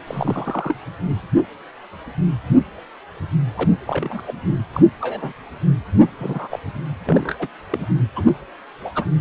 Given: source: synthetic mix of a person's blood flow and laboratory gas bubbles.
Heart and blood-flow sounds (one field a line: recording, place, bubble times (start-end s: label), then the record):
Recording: Doppler ultrasound of blood flow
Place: precordium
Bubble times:
0.07-0.75 s: bubbles
3.57-3.70 s: bubbles
3.87-4.22 s: bubbles
4.28-4.33 s: bubbles
4.72-4.83 s: bubbles
5.00-5.33 s: bubbles
6.18-6.59 s: bubbles
7.04-7.35 s: bubbles
7.38-7.48 s: bubbles
7.70-7.87 s: bubbles
8.15-8.33 s: bubbles
8.81-8.90 s: bubbles
8.95-9.05 s: bubbles
From the record:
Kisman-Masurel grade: 232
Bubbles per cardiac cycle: several, 3 to 8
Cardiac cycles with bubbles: 50 to 99%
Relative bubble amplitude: moderate (0.250 to 0.450)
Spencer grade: 3 (all of the cardiac periods contain showers or single bubble signals, but not dominating or overriding the cardiac motion signals)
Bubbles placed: anywhere in the cardiac cycle